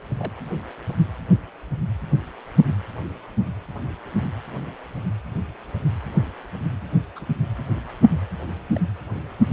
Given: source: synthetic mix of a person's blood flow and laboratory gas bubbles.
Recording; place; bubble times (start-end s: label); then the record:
Doppler ultrasound of blood flow; precordium
0.18-0.32 s: bubbles
6.15-6.32 s: bubbles
7.16-7.25 s: bubbles
8.76-8.80 s: bubbles
From the record:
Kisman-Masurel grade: 121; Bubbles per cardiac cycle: 1 to 2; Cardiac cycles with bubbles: 10 to 50%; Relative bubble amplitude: barely perceptible (0.100 to 0.250); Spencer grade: 2 (many but less than half of the cardiac periods contain bubble signals, singularly or in groups); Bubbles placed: anywhere in the cardiac cycle